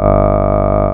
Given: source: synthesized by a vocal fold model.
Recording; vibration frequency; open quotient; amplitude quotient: sustained vowel; 50 Hz; 0.5; 1.4